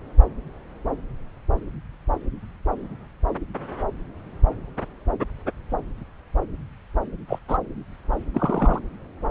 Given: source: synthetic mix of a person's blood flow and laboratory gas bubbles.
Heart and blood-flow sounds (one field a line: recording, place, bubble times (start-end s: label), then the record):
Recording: Doppler ultrasound of blood flow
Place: subclavian vein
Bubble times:
7.27-7.38 s: bubbles
7.48-7.57 s: bubbles
8.34-8.79 s: bubbles
From the record:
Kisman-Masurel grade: 122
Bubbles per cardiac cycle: 1 to 2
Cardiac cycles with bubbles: 10 to 50%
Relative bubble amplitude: moderate (0.250 to 0.450)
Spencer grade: 2 (many but less than half of the cardiac periods contain bubble signals, singularly or in groups)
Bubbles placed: anywhere in the cardiac cycle